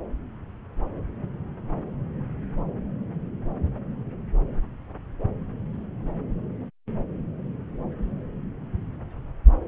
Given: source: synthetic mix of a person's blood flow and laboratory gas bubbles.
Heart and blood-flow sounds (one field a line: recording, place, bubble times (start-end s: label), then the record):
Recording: Doppler ultrasound of blood flow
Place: subclavian vein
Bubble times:
no bubbles
From the record:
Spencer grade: 0 (complete lack of bubble signals)